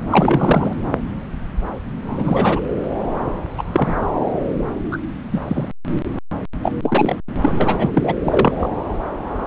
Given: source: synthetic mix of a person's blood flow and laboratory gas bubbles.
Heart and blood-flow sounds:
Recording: Doppler ultrasound of blood flow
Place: subclavian vein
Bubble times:
0.10-0.74 s: bubbles
2.05-2.60 s: bubbles
3.58-3.62 s: bubbles
3.72-3.94 s: bubbles
4.91-4.98 s: bubbles
5.33-5.40 s: bubbles
5.48-5.68 s: bubbles
6.62-6.72 s: bubbles
6.82-7.16 s: bubbles
7.42-7.91 s: bubbles
7.95-8.14 s: bubbles
8.25-8.70 s: bubbles
From the record:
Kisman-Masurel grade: 233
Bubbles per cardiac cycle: several, 3 to 8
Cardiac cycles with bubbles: 50 to 99%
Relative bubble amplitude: loud (0.450 to 0.775)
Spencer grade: 3 (all of the cardiac periods contain showers or single bubble signals, but not dominating or overriding the cardiac motion signals)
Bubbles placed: anywhere in the cardiac cycle

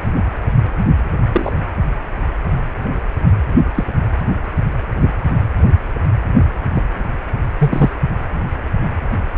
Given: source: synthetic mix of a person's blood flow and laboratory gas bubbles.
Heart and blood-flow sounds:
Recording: Doppler ultrasound of blood flow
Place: precordium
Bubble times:
1.32-1.60 s: bubbles
3.74-3.85 s: bubbles
5.01-5.10 s: bubbles
6.75-6.83 s: bubbles
7.58-7.89 s: bubbles
From the record:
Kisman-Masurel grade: 123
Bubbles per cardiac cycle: 1 to 2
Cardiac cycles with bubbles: 10 to 50%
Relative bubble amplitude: loud (0.450 to 0.775)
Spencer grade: 2 (many but less than half of the cardiac periods contain bubble signals, singularly or in groups)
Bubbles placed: anywhere in the cardiac cycle

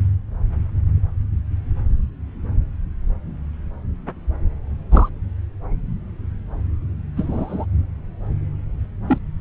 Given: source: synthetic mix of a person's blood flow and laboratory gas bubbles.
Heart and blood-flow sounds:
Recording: Doppler ultrasound of blood flow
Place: subclavian vein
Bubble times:
4.92-5.09 s: bubbles
7.17-7.65 s: bubbles
9.06-9.18 s: bubbles
From the record:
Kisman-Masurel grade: 122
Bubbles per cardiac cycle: 1 to 2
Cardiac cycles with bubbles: 10 to 50%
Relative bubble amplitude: moderate (0.250 to 0.450)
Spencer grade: 2 (many but less than half of the cardiac periods contain bubble signals, singularly or in groups)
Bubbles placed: anywhere in the cardiac cycle

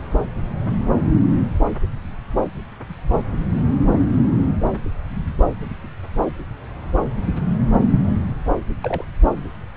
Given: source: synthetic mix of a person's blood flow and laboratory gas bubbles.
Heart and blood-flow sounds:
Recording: Doppler ultrasound of blood flow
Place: subclavian vein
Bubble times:
8.81-9.04 s: bubbles
From the record:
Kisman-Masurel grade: 111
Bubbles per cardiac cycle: 1 to 2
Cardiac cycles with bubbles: 1 to 10%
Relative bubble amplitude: barely perceptible (0.100 to 0.250)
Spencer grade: 1 (occasional bubble signal discernible with the cardiac motion signal, with majority of cardiac periods free of bubbles)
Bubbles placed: anywhere in the cardiac cycle

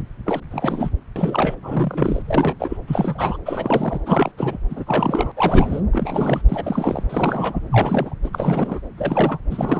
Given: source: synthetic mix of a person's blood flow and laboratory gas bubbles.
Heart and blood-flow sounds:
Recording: Doppler ultrasound of blood flow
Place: subclavian vein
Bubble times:
0.25-0.42 s: bubbles
0.51-0.91 s: bubbles
1.16-1.54 s: bubbles
1.63-2.23 s: bubbles
2.28-2.56 s: bubbles
2.60-2.77 s: bubbles
2.88-3.38 s: bubbles
3.45-4.00 s: bubbles
4.05-4.32 s: bubbles
4.38-4.58 s: bubbles
4.70-4.84 s: bubbles
4.87-5.32 s: bubbles
5.36-5.81 s: bubbles
5.92-6.42 s: bubbles
6.48-7.04 s: bubbles
7.09-7.61 s: bubbles
7.71-8.14 s: bubbles
8.23-8.29 s: bubbles
8.32-8.79 s: bubbles
8.97-9.38 s: bubbles
9.50-9.80 s: bubbles
From the record:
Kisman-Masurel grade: 342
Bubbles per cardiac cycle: rolling drumbeat, 9 or more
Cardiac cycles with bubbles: 100%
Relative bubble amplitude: moderate (0.250 to 0.450)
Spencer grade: 3 (all of the cardiac periods contain showers or single bubble signals, but not dominating or overriding the cardiac motion signals)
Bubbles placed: anywhere in the cardiac cycle

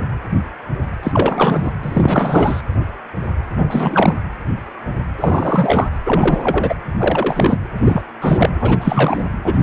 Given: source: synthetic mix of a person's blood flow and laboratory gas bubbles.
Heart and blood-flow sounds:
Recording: Doppler ultrasound of blood flow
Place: precordium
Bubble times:
1.03-1.71 s: bubbles
1.82-2.61 s: bubbles
3.56-4.15 s: bubbles
5.17-5.88 s: bubbles
6.04-6.75 s: bubbles
6.97-7.59 s: bubbles
7.84-8.02 s: bubbles
8.21-8.50 s: bubbles
8.60-9.25 s: bubbles
9.44-9.63 s: bubbles
From the record:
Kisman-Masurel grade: 333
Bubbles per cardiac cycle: rolling drumbeat, 9 or more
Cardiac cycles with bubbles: 50 to 99%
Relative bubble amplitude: loud (0.450 to 0.775)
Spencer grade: 3 (all of the cardiac periods contain showers or single bubble signals, but not dominating or overriding the cardiac motion signals)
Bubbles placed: anywhere in the cardiac cycle

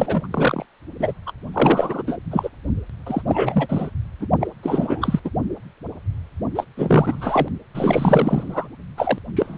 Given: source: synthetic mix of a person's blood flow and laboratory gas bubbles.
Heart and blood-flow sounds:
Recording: Doppler ultrasound of blood flow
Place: precordium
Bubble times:
0.00-0.27 s: bubbles
0.30-0.66 s: bubbles
0.99-1.12 s: bubbles
1.26-1.32 s: bubbles
1.52-2.02 s: bubbles
2.06-2.18 s: bubbles
2.30-2.50 s: bubbles
3.06-3.22 s: bubbles
3.27-3.90 s: bubbles
4.20-4.28 s: bubbles
4.40-4.47 s: bubbles
4.62-5.20 s: bubbles
5.24-5.30 s: bubbles
6.55-6.64 s: bubbles
6.77-7.49 s: bubbles
7.74-8.68 s: bubbles
8.96-9.19 s: bubbles
9.35-9.58 s: bubbles
From the record:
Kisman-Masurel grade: 333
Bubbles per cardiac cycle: rolling drumbeat, 9 or more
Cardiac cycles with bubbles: 50 to 99%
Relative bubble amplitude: loud (0.450 to 0.775)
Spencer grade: 3 (all of the cardiac periods contain showers or single bubble signals, but not dominating or overriding the cardiac motion signals)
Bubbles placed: only in the low amplitude regions of the cardiac cycle

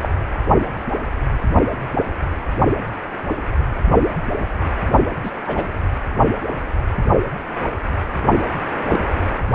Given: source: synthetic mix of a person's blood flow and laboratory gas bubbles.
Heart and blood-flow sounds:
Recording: Doppler ultrasound of blood flow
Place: precordium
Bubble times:
0.02-0.09 s: bubbles
5.23-5.30 s: bubbles
5.46-5.68 s: bubbles
8.89-9.02 s: bubbles
From the record:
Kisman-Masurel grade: 122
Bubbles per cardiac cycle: 1 to 2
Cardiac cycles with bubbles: 10 to 50%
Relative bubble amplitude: moderate (0.250 to 0.450)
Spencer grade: 2 (many but less than half of the cardiac periods contain bubble signals, singularly or in groups)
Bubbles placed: only in the low amplitude regions of the cardiac cycle

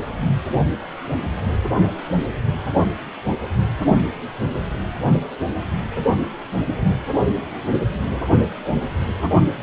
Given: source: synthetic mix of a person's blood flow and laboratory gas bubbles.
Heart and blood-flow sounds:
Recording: Doppler ultrasound of blood flow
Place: precordium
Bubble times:
9.60-9.63 s: bubbles
From the record:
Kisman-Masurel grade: 213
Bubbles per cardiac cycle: several, 3 to 8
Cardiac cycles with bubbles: 1 to 10%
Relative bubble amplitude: loud (0.450 to 0.775)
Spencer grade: 1 (occasional bubble signal discernible with the cardiac motion signal, with majority of cardiac periods free of bubbles)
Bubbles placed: only in the low amplitude regions of the cardiac cycle

